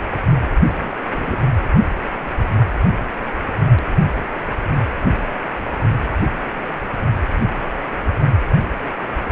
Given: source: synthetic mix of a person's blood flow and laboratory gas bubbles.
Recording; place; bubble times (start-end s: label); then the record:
Doppler ultrasound of blood flow; precordium
0.51-0.68 s: bubbles
0.79-0.95 s: bubbles
1.10-1.41 s: bubbles
From the record:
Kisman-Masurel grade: 221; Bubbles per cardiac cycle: several, 3 to 8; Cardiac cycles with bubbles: 10 to 50%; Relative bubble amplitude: barely perceptible (0.100 to 0.250); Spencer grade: 2 (many but less than half of the cardiac periods contain bubble signals, singularly or in groups); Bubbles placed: anywhere in the cardiac cycle